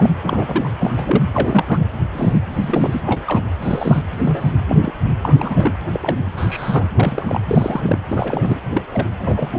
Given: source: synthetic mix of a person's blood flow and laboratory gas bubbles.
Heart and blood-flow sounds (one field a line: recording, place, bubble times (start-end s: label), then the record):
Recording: Doppler ultrasound of blood flow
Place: precordium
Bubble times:
0.00-0.10 s: bubbles
0.23-0.69 s: bubbles
0.79-1.24 s: bubbles
1.33-1.86 s: bubbles
2.13-2.40 s: bubbles
2.52-3.01 s: bubbles
3.04-3.22 s: bubbles
3.27-3.45 s: bubbles
3.60-4.02 s: bubbles
4.14-4.53 s: bubbles
4.67-4.93 s: bubbles
5.22-5.72 s: bubbles
5.93-6.14 s: bubbles
6.37-6.87 s: bubbles
6.95-7.41 s: bubbles
7.48-7.98 s: bubbles
8.09-8.57 s: bubbles
8.72-8.82 s: bubbles
8.91-9.10 s: bubbles
9.19-9.59 s: bubbles
From the record:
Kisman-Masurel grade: 242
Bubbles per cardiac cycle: several, 3 to 8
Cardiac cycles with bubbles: 100%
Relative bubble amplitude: moderate (0.250 to 0.450)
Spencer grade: 3 (all of the cardiac periods contain showers or single bubble signals, but not dominating or overriding the cardiac motion signals)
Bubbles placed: anywhere in the cardiac cycle